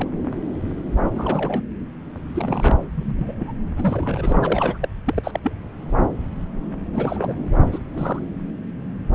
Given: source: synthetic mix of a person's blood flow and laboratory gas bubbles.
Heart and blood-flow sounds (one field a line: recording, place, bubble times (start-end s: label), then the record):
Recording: Doppler ultrasound of blood flow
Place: subclavian vein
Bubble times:
0.00-0.08 s: bubbles
1.15-1.62 s: bubbles
2.35-2.75 s: bubbles
2.94-3.53 s: bubbles
3.77-4.38 s: bubbles
4.42-4.78 s: bubbles
4.81-4.88 s: bubbles
5.05-5.39 s: bubbles
5.43-5.52 s: bubbles
6.92-7.33 s: bubbles
7.72-7.78 s: bubbles
7.94-8.20 s: bubbles
From the record:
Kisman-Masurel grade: 232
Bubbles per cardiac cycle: several, 3 to 8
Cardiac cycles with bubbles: 50 to 99%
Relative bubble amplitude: moderate (0.250 to 0.450)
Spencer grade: 3 (all of the cardiac periods contain showers or single bubble signals, but not dominating or overriding the cardiac motion signals)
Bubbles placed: anywhere in the cardiac cycle